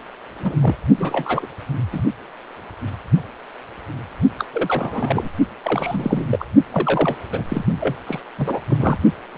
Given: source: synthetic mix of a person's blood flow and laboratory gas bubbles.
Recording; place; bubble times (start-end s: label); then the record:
Doppler ultrasound of blood flow; precordium
0.39-0.56 s: bubbles
0.60-0.75 s: bubbles
0.96-1.46 s: bubbles
1.92-2.02 s: bubbles
4.38-4.45 s: bubbles
4.54-5.29 s: bubbles
5.62-6.45 s: bubbles
6.71-7.16 s: bubbles
7.31-7.42 s: bubbles
7.49-7.65 s: bubbles
7.81-7.96 s: bubbles
8.06-8.20 s: bubbles
8.38-8.59 s: bubbles
8.68-8.97 s: bubbles
9.30-9.38 s: bubbles
From the record:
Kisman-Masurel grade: 332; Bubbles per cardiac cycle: rolling drumbeat, 9 or more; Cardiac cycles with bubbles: 50 to 99%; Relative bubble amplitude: moderate (0.250 to 0.450); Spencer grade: 3 (all of the cardiac periods contain showers or single bubble signals, but not dominating or overriding the cardiac motion signals); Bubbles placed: only in the low amplitude regions of the cardiac cycle